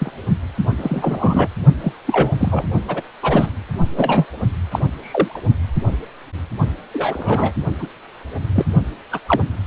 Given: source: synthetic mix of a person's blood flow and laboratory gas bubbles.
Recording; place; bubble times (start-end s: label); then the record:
Doppler ultrasound of blood flow; precordium
0.00-0.12 s: bubbles
0.78-1.48 s: bubbles
1.81-1.93 s: bubbles
2.06-2.32 s: bubbles
2.40-2.65 s: bubbles
2.88-3.01 s: bubbles
3.21-3.52 s: bubbles
3.96-4.25 s: bubbles
4.71-4.79 s: bubbles
5.00-5.42 s: bubbles
6.93-7.52 s: bubbles
7.79-7.87 s: bubbles
8.55-8.65 s: bubbles
9.12-9.19 s: bubbles
9.27-9.40 s: bubbles
From the record:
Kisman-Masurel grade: 233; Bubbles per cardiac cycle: several, 3 to 8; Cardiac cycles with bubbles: 50 to 99%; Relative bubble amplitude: loud (0.450 to 0.775); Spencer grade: 3 (all of the cardiac periods contain showers or single bubble signals, but not dominating or overriding the cardiac motion signals); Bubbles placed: only in the low amplitude regions of the cardiac cycle